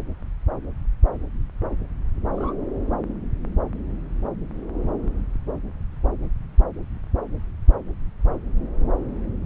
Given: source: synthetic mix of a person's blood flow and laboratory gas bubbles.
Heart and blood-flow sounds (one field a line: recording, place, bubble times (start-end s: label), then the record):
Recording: Doppler ultrasound of blood flow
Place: subclavian vein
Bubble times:
2.34-2.53 s: bubbles
From the record:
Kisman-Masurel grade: 111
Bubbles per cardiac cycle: 1 to 2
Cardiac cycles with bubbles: 1 to 10%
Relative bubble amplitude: barely perceptible (0.100 to 0.250)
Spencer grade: 1 (occasional bubble signal discernible with the cardiac motion signal, with majority of cardiac periods free of bubbles)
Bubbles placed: anywhere in the cardiac cycle